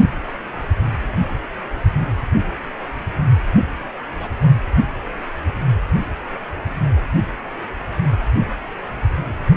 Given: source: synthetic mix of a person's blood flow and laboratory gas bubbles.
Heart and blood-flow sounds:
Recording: Doppler ultrasound of blood flow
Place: precordium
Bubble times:
4.19-4.31 s: bubbles
From the record:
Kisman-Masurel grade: 121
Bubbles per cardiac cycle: 1 to 2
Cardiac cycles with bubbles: 10 to 50%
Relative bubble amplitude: barely perceptible (0.100 to 0.250)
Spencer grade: 2 (many but less than half of the cardiac periods contain bubble signals, singularly or in groups)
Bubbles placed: only in the low amplitude regions of the cardiac cycle

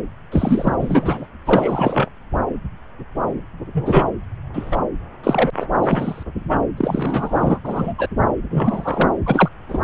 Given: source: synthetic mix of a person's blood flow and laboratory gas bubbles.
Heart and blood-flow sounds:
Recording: Doppler ultrasound of blood flow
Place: subclavian vein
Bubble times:
0.31-0.75 s: bubbles
0.80-1.27 s: bubbles
1.45-2.09 s: bubbles
3.73-4.10 s: bubbles
4.54-4.78 s: bubbles
5.23-5.50 s: bubbles
5.60-5.66 s: bubbles
5.83-6.23 s: bubbles
6.77-7.60 s: bubbles
7.64-7.93 s: bubbles
7.98-8.08 s: bubbles
8.50-9.09 s: bubbles
9.26-9.49 s: bubbles
9.69-9.82 s: bubbles
From the record:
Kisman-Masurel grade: 233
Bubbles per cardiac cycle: several, 3 to 8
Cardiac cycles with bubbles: 50 to 99%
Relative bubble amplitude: loud (0.450 to 0.775)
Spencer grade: 3 (all of the cardiac periods contain showers or single bubble signals, but not dominating or overriding the cardiac motion signals)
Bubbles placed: anywhere in the cardiac cycle

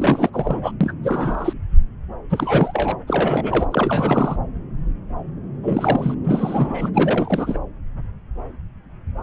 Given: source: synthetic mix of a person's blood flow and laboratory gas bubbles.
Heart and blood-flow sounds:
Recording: Doppler ultrasound of blood flow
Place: subclavian vein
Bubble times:
0.00-0.29 s: bubbles
0.34-0.72 s: bubbles
0.80-0.92 s: bubbles
1.03-1.54 s: bubbles
2.29-2.96 s: bubbles
3.07-3.67 s: bubbles
3.72-4.36 s: bubbles
5.62-6.14 s: bubbles
6.24-6.90 s: bubbles
6.94-7.58 s: bubbles
From the record:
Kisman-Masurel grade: 332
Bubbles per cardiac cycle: rolling drumbeat, 9 or more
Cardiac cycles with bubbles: 50 to 99%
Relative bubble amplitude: moderate (0.250 to 0.450)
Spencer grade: 3 (all of the cardiac periods contain showers or single bubble signals, but not dominating or overriding the cardiac motion signals)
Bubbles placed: anywhere in the cardiac cycle

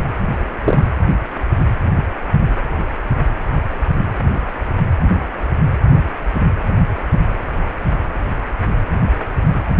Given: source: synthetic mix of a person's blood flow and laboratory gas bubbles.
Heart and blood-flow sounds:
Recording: Doppler ultrasound of blood flow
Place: precordium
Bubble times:
0.00-0.04 s: bubbles
0.64-0.84 s: bubbles
From the record:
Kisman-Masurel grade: 123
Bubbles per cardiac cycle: 1 to 2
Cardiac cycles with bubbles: 10 to 50%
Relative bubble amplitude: loud (0.450 to 0.775)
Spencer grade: 2 (many but less than half of the cardiac periods contain bubble signals, singularly or in groups)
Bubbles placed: anywhere in the cardiac cycle

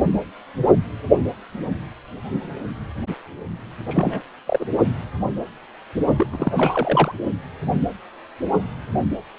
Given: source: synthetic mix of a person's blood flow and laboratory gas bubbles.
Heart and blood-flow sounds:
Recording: Doppler ultrasound of blood flow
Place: precordium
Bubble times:
3.88-4.21 s: bubbles
4.47-4.65 s: bubbles
6.16-6.28 s: bubbles
6.31-7.12 s: bubbles
From the record:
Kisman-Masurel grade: 222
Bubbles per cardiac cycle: several, 3 to 8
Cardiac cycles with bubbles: 10 to 50%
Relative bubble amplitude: moderate (0.250 to 0.450)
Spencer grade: 2 (many but less than half of the cardiac periods contain bubble signals, singularly or in groups)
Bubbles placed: only in the low amplitude regions of the cardiac cycle

